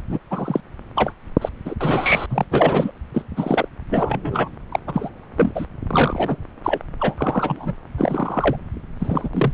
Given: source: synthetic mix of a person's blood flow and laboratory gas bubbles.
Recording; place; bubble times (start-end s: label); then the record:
Doppler ultrasound of blood flow; subclavian vein
0.09-0.18 s: bubbles
0.30-0.61 s: bubbles
0.95-1.12 s: bubbles
1.41-1.49 s: bubbles
1.65-1.74 s: bubbles
1.80-2.26 s: bubbles
2.29-2.44 s: bubbles
2.50-2.91 s: bubbles
3.13-3.24 s: bubbles
3.36-3.68 s: bubbles
3.90-4.50 s: bubbles
4.71-4.79 s: bubbles
4.87-5.09 s: bubbles
5.37-5.52 s: bubbles
5.54-5.66 s: bubbles
5.87-6.38 s: bubbles
6.63-6.79 s: bubbles
7.00-7.74 s: bubbles
7.97-8.56 s: bubbles
8.99-9.29 s: bubbles
9.33-9.52 s: bubbles
From the record:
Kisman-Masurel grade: 243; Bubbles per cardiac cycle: several, 3 to 8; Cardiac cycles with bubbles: 100%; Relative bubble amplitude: loud (0.450 to 0.775); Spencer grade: 3 (all of the cardiac periods contain showers or single bubble signals, but not dominating or overriding the cardiac motion signals); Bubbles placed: anywhere in the cardiac cycle